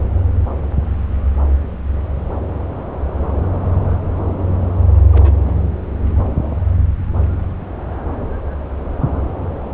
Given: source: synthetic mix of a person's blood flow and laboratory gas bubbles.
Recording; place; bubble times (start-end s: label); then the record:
Doppler ultrasound of blood flow; subclavian vein
5.12-5.33 s: bubbles
5.45-5.53 s: bubbles
From the record:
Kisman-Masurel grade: 111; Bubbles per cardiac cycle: 1 to 2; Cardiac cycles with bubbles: 1 to 10%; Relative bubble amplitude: barely perceptible (0.100 to 0.250); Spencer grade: 1 (occasional bubble signal discernible with the cardiac motion signal, with majority of cardiac periods free of bubbles); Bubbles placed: anywhere in the cardiac cycle